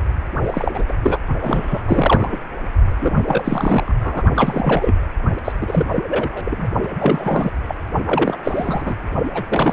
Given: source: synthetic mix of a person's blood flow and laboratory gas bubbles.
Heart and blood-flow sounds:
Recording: Doppler ultrasound of blood flow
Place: precordium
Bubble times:
0.44-0.84 s: bubbles
0.88-0.93 s: bubbles
1.03-1.19 s: bubbles
1.41-1.83 s: bubbles
1.85-2.37 s: bubbles
3.00-3.95 s: bubbles
4.00-4.22 s: bubbles
4.36-5.00 s: bubbles
5.45-5.52 s: bubbles
5.61-5.87 s: bubbles
5.94-6.04 s: bubbles
6.09-6.69 s: bubbles
6.83-6.88 s: bubbles
6.99-7.50 s: bubbles
7.68-7.75 s: bubbles
8.05-8.94 s: bubbles
9.34-9.43 s: bubbles
9.49-9.72 s: bubbles
From the record:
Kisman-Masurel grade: 342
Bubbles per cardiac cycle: rolling drumbeat, 9 or more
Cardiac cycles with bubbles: 100%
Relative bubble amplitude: moderate (0.250 to 0.450)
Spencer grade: 3 (all of the cardiac periods contain showers or single bubble signals, but not dominating or overriding the cardiac motion signals)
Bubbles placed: only in the low amplitude regions of the cardiac cycle

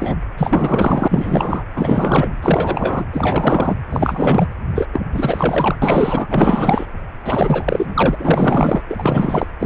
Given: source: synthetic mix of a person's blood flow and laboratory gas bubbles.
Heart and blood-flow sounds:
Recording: Doppler ultrasound of blood flow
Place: precordium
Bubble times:
0.00-0.15 s: bubbles
0.37-1.63 s: bubbles
1.76-2.35 s: bubbles
2.42-3.05 s: bubbles
3.12-3.76 s: bubbles
3.89-4.46 s: bubbles
4.75-4.86 s: bubbles
4.93-5.01 s: bubbles
5.12-5.75 s: bubbles
5.82-6.27 s: bubbles
6.30-6.86 s: bubbles
7.25-8.16 s: bubbles
8.18-8.82 s: bubbles
8.89-9.46 s: bubbles
9.59-9.66 s: bubbles
From the record:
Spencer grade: 4 (maximum detectable bubble signal sounding continuously throughout systole and diastole of every cardiac period, and overriding the amplitude of the normal cardiac signals)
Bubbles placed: anywhere in the cardiac cycle

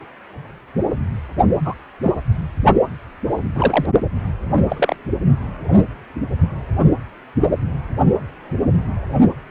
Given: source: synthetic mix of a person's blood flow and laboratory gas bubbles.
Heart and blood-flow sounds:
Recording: Doppler ultrasound of blood flow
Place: precordium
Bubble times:
1.65-1.74 s: bubbles
2.03-2.12 s: bubbles
3.54-3.85 s: bubbles
4.69-4.96 s: bubbles
From the record:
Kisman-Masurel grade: 123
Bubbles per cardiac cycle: 1 to 2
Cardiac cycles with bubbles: 10 to 50%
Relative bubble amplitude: loud (0.450 to 0.775)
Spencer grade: 2 (many but less than half of the cardiac periods contain bubble signals, singularly or in groups)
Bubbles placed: only in the low amplitude regions of the cardiac cycle

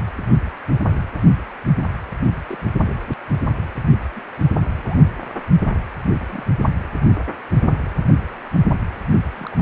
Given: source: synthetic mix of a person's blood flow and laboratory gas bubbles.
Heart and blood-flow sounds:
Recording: Doppler ultrasound of blood flow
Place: precordium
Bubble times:
2.47-2.70 s: bubbles
4.17-4.21 s: bubbles
4.75-4.95 s: bubbles
6.30-6.43 s: bubbles
9.36-9.55 s: bubbles
9.58-9.62 s: bubbles
From the record:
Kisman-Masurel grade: 121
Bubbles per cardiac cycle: 1 to 2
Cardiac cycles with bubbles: 10 to 50%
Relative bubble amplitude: barely perceptible (0.100 to 0.250)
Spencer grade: 2 (many but less than half of the cardiac periods contain bubble signals, singularly or in groups)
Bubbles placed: only in the low amplitude regions of the cardiac cycle

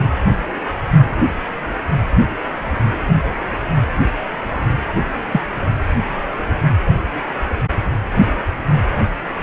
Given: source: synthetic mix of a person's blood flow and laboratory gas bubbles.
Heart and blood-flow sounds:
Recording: Doppler ultrasound of blood flow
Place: precordium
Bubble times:
5.31-5.41 s: bubbles
From the record:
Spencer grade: 1 (occasional bubble signal discernible with the cardiac motion signal, with majority of cardiac periods free of bubbles)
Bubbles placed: anywhere in the cardiac cycle

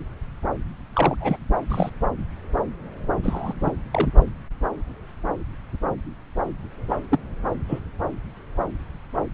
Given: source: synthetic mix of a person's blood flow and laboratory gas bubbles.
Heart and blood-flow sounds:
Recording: Doppler ultrasound of blood flow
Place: subclavian vein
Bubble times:
0.94-1.15 s: bubbles
1.21-1.37 s: bubbles
1.69-1.90 s: bubbles
3.23-3.53 s: bubbles
3.60-3.72 s: bubbles
3.93-4.08 s: bubbles
6.89-6.97 s: bubbles
7.11-7.19 s: bubbles
7.68-7.79 s: bubbles
From the record:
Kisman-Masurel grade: 122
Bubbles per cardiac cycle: 1 to 2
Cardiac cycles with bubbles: 10 to 50%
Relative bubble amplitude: moderate (0.250 to 0.450)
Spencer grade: 2 (many but less than half of the cardiac periods contain bubble signals, singularly or in groups)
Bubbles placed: anywhere in the cardiac cycle

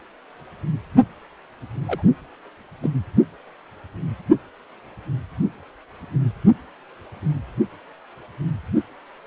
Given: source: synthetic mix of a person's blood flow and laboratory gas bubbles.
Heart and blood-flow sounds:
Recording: Doppler ultrasound of blood flow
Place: precordium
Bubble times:
1.87-2.02 s: bubbles
2.83-2.90 s: bubbles
From the record:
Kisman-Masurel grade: 112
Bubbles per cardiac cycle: 1 to 2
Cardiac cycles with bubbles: 1 to 10%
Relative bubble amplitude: moderate (0.250 to 0.450)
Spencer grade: 1 (occasional bubble signal discernible with the cardiac motion signal, with majority of cardiac periods free of bubbles)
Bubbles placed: only in the low amplitude regions of the cardiac cycle

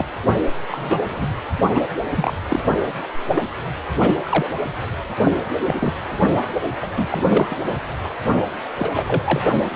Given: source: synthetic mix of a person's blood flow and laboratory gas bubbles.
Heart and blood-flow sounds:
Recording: Doppler ultrasound of blood flow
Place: precordium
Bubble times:
0.00-0.05 s: bubbles
0.71-1.03 s: bubbles
1.09-1.41 s: bubbles
1.73-1.83 s: bubbles
2.15-2.33 s: bubbles
2.48-2.59 s: bubbles
2.65-2.83 s: bubbles
3.33-3.42 s: bubbles
3.97-4.14 s: bubbles
4.24-4.50 s: bubbles
5.24-5.31 s: bubbles
5.67-5.93 s: bubbles
6.82-7.06 s: bubbles
7.10-7.25 s: bubbles
7.29-7.81 s: bubbles
8.04-8.08 s: bubbles
8.78-9.42 s: bubbles
9.74-9.76 s: bubbles
From the record:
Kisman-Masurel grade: 242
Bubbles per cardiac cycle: several, 3 to 8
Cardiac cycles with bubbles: 100%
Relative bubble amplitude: moderate (0.250 to 0.450)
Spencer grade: 3 (all of the cardiac periods contain showers or single bubble signals, but not dominating or overriding the cardiac motion signals)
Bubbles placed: only in the low amplitude regions of the cardiac cycle

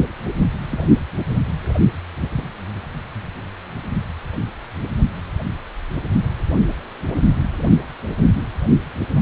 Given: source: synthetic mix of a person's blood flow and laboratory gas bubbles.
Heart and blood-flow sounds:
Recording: Doppler ultrasound of blood flow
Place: precordium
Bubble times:
0.68-0.87 s: bubbles
7.12-7.20 s: bubbles
From the record:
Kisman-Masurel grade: 121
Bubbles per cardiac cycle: 1 to 2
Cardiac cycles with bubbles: 10 to 50%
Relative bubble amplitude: barely perceptible (0.100 to 0.250)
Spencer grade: 2 (many but less than half of the cardiac periods contain bubble signals, singularly or in groups)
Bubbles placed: anywhere in the cardiac cycle

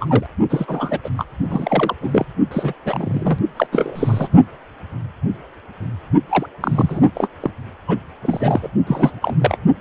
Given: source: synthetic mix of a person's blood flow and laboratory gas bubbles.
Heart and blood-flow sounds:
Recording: Doppler ultrasound of blood flow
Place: precordium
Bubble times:
0.00-0.26 s: bubbles
0.49-0.98 s: bubbles
1.03-1.09 s: bubbles
1.17-1.24 s: bubbles
1.49-1.95 s: bubbles
2.01-2.26 s: bubbles
2.51-2.73 s: bubbles
2.85-3.39 s: bubbles
3.56-3.67 s: bubbles
3.72-4.29 s: bubbles
6.29-6.46 s: bubbles
6.60-7.10 s: bubbles
7.14-7.29 s: bubbles
7.40-7.51 s: bubbles
7.88-7.98 s: bubbles
8.22-8.69 s: bubbles
8.87-9.19 s: bubbles
9.21-9.37 s: bubbles
9.39-9.57 s: bubbles
From the record:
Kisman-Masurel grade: 232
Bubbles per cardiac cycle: several, 3 to 8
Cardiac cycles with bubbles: 50 to 99%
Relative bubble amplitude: moderate (0.250 to 0.450)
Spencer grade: 3 (all of the cardiac periods contain showers or single bubble signals, but not dominating or overriding the cardiac motion signals)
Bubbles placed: only in the low amplitude regions of the cardiac cycle

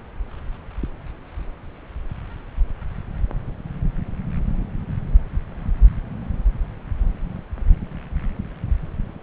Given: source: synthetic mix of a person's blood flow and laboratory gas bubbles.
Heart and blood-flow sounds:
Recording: Doppler ultrasound of blood flow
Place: subclavian vein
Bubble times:
no bubbles
From the record:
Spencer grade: 0 (complete lack of bubble signals)

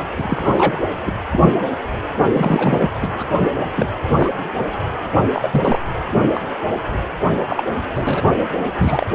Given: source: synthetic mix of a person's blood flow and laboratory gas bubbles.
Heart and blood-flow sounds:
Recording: Doppler ultrasound of blood flow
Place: precordium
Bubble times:
0.18-0.82 s: bubbles
1.06-1.13 s: bubbles
1.31-1.58 s: bubbles
2.19-2.24 s: bubbles
2.33-2.90 s: bubbles
3.00-3.26 s: bubbles
3.38-3.50 s: bubbles
3.75-3.90 s: bubbles
4.18-4.33 s: bubbles
5.33-5.79 s: bubbles
6.34-6.44 s: bubbles
7.48-7.64 s: bubbles
7.96-8.35 s: bubbles
8.78-9.06 s: bubbles
From the record:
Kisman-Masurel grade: 243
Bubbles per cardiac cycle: several, 3 to 8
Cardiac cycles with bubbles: 100%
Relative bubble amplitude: loud (0.450 to 0.775)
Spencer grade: 3 (all of the cardiac periods contain showers or single bubble signals, but not dominating or overriding the cardiac motion signals)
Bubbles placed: anywhere in the cardiac cycle

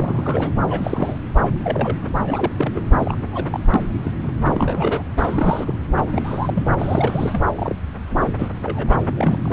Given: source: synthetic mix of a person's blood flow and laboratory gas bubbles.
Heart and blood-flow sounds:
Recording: Doppler ultrasound of blood flow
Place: subclavian vein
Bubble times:
0.00-0.51 s: bubbles
0.54-0.61 s: bubbles
0.68-1.18 s: bubbles
1.45-1.52 s: bubbles
1.64-1.97 s: bubbles
2.19-2.54 s: bubbles
2.56-2.82 s: bubbles
2.98-3.18 s: bubbles
3.32-3.45 s: bubbles
3.52-3.60 s: bubbles
3.74-3.88 s: bubbles
4.03-4.12 s: bubbles
4.23-4.33 s: bubbles
4.44-5.04 s: bubbles
5.17-5.74 s: bubbles
5.96-6.66 s: bubbles
6.79-7.45 s: bubbles
7.55-7.76 s: bubbles
8.12-8.32 s: bubbles
8.38-8.48 s: bubbles
8.63-8.98 s: bubbles
9.16-9.53 s: bubbles
From the record:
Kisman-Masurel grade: 242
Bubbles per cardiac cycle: several, 3 to 8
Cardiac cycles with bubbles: 100%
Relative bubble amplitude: moderate (0.250 to 0.450)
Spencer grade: 3 (all of the cardiac periods contain showers or single bubble signals, but not dominating or overriding the cardiac motion signals)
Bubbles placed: anywhere in the cardiac cycle

